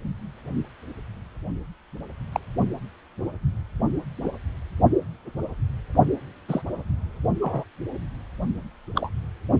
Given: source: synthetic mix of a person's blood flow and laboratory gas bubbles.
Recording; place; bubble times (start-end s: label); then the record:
Doppler ultrasound of blood flow; precordium
2.33-2.40 s: bubbles
4.23-4.30 s: bubbles
6.49-6.62 s: bubbles
7.41-7.64 s: bubbles
8.95-9.10 s: bubbles
From the record:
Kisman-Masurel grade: 122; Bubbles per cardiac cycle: 1 to 2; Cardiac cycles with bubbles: 10 to 50%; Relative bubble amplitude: moderate (0.250 to 0.450); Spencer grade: 2 (many but less than half of the cardiac periods contain bubble signals, singularly or in groups); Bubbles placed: only in the low amplitude regions of the cardiac cycle